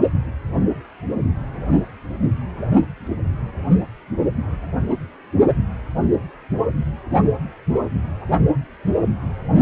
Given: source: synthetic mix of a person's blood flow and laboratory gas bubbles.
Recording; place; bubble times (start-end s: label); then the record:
Doppler ultrasound of blood flow; precordium
no bubbles
From the record:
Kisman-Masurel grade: 000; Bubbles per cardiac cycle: 0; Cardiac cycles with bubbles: 0%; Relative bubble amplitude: no bubbles discernible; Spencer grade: 0 (complete lack of bubble signals)